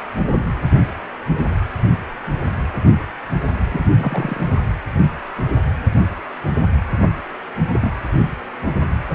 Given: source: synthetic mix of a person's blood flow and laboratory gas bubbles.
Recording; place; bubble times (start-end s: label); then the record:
Doppler ultrasound of blood flow; precordium
3.71-3.85 s: bubbles
3.99-4.38 s: bubbles
4.94-5.08 s: bubbles
7.73-7.92 s: bubbles
From the record:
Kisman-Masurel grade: 122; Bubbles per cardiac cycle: 1 to 2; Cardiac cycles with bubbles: 10 to 50%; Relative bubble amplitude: moderate (0.250 to 0.450); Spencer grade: 2 (many but less than half of the cardiac periods contain bubble signals, singularly or in groups); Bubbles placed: anywhere in the cardiac cycle